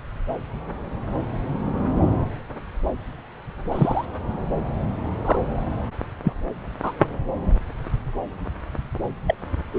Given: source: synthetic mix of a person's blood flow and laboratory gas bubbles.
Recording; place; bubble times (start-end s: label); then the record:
Doppler ultrasound of blood flow; subclavian vein
3.72-4.05 s: bubbles
5.25-5.38 s: bubbles
6.24-6.33 s: bubbles
6.83-6.92 s: bubbles
9.27-9.35 s: bubbles
9.73-9.79 s: bubbles
From the record:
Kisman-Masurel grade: 122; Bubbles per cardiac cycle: 1 to 2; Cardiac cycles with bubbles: 10 to 50%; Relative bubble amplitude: moderate (0.250 to 0.450); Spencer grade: 2 (many but less than half of the cardiac periods contain bubble signals, singularly or in groups); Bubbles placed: anywhere in the cardiac cycle